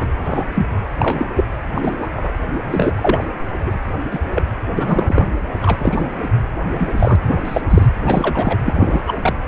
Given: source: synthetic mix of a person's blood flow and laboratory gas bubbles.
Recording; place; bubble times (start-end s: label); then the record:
Doppler ultrasound of blood flow; precordium
0.00-0.07 s: bubbles
0.24-0.44 s: bubbles
0.55-0.66 s: bubbles
0.98-1.28 s: bubbles
1.35-1.45 s: bubbles
1.74-1.99 s: bubbles
2.02-2.08 s: bubbles
2.17-2.33 s: bubbles
2.71-3.26 s: bubbles
3.66-3.71 s: bubbles
4.10-4.20 s: bubbles
4.34-4.43 s: bubbles
4.71-5.23 s: bubbles
5.62-6.10 s: bubbles
6.78-7.16 s: bubbles
7.22-7.42 s: bubbles
7.45-7.61 s: bubbles
7.69-7.86 s: bubbles
8.06-8.59 s: bubbles
8.65-9.01 s: bubbles
9.07-9.17 s: bubbles
9.21-9.34 s: bubbles
From the record:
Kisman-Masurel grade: 243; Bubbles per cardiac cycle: several, 3 to 8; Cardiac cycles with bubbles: 100%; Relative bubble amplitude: loud (0.450 to 0.775); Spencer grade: 3 (all of the cardiac periods contain showers or single bubble signals, but not dominating or overriding the cardiac motion signals); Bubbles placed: anywhere in the cardiac cycle